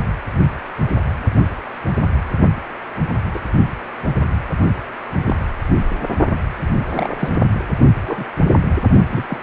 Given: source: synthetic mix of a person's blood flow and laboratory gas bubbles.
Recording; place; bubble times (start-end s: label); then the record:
Doppler ultrasound of blood flow; precordium
3.34-3.40 s: bubbles
5.26-5.34 s: bubbles
6.94-7.33 s: bubbles
8.06-8.25 s: bubbles
9.10-9.25 s: bubbles
9.28-9.38 s: bubbles
From the record:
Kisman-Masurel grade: 122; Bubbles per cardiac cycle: 1 to 2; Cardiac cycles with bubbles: 10 to 50%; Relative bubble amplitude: moderate (0.250 to 0.450); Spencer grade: 2 (many but less than half of the cardiac periods contain bubble signals, singularly or in groups); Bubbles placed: only in the low amplitude regions of the cardiac cycle